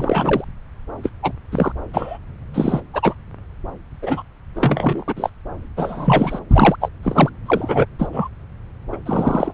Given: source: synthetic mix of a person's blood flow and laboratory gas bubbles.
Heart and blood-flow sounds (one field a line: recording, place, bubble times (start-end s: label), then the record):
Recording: Doppler ultrasound of blood flow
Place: subclavian vein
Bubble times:
0.00-0.45 s: bubbles
1.03-1.09 s: bubbles
1.22-1.32 s: bubbles
1.52-1.72 s: bubbles
1.94-2.18 s: bubbles
2.54-2.81 s: bubbles
2.93-3.15 s: bubbles
4.02-4.23 s: bubbles
4.55-5.04 s: bubbles
5.08-5.14 s: bubbles
5.17-5.30 s: bubbles
5.77-6.39 s: bubbles
6.50-6.76 s: bubbles
6.81-6.89 s: bubbles
7.03-7.30 s: bubbles
7.46-7.85 s: bubbles
7.99-8.09 s: bubbles
8.12-8.29 s: bubbles
8.92-8.97 s: bubbles
9.05-9.53 s: bubbles
From the record:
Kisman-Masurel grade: 243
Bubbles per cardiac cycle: several, 3 to 8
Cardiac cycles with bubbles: 100%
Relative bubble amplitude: loud (0.450 to 0.775)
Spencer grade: 3 (all of the cardiac periods contain showers or single bubble signals, but not dominating or overriding the cardiac motion signals)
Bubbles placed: anywhere in the cardiac cycle